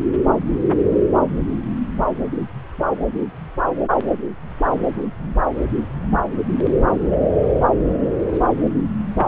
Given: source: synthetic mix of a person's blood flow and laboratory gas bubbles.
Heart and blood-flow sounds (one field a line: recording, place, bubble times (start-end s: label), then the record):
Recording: Doppler ultrasound of blood flow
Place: subclavian vein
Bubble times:
5.18-5.32 s: bubbles
5.95-6.06 s: bubbles
6.90-7.17 s: bubbles
8.29-8.41 s: bubbles
From the record:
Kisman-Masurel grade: 121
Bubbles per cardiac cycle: 1 to 2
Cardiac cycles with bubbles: 10 to 50%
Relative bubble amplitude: barely perceptible (0.100 to 0.250)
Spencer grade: 2 (many but less than half of the cardiac periods contain bubble signals, singularly or in groups)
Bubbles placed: anywhere in the cardiac cycle